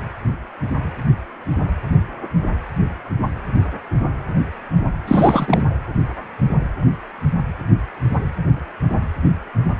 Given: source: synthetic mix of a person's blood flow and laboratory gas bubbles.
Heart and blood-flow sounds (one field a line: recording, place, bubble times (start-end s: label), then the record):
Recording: Doppler ultrasound of blood flow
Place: precordium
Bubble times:
5.08-5.64 s: bubbles
From the record:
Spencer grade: 1 (occasional bubble signal discernible with the cardiac motion signal, with majority of cardiac periods free of bubbles)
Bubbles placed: anywhere in the cardiac cycle